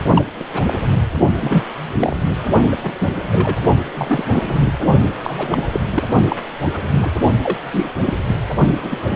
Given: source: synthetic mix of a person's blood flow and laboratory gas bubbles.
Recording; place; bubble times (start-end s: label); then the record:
Doppler ultrasound of blood flow; precordium
0.00-0.24 s: bubbles
0.39-0.44 s: bubbles
0.53-0.62 s: bubbles
0.67-0.79 s: bubbles
1.40-1.64 s: bubbles
1.99-2.17 s: bubbles
2.71-2.75 s: bubbles
2.83-2.94 s: bubbles
3.00-3.09 s: bubbles
3.32-3.56 s: bubbles
3.94-4.25 s: bubbles
4.31-4.42 s: bubbles
4.47-4.72 s: bubbles
5.23-5.64 s: bubbles
5.72-5.80 s: bubbles
5.92-6.04 s: bubbles
6.28-6.36 s: bubbles
6.65-6.78 s: bubbles
6.97-7.09 s: bubbles
7.43-7.57 s: bubbles
7.71-7.89 s: bubbles
8.04-8.14 s: bubbles
8.25-8.36 s: bubbles
8.82-9.16 s: bubbles
From the record:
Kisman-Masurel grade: 242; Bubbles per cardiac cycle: several, 3 to 8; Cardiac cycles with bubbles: 100%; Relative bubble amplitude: moderate (0.250 to 0.450); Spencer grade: 3 (all of the cardiac periods contain showers or single bubble signals, but not dominating or overriding the cardiac motion signals); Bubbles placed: only in the low amplitude regions of the cardiac cycle